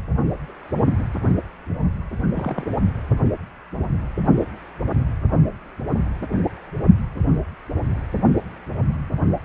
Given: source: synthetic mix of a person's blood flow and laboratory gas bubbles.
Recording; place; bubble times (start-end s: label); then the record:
Doppler ultrasound of blood flow; precordium
2.33-2.76 s: bubbles
From the record:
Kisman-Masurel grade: 111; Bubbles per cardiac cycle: 1 to 2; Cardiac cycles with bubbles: 1 to 10%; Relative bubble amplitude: barely perceptible (0.100 to 0.250); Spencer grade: 1 (occasional bubble signal discernible with the cardiac motion signal, with majority of cardiac periods free of bubbles); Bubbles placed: anywhere in the cardiac cycle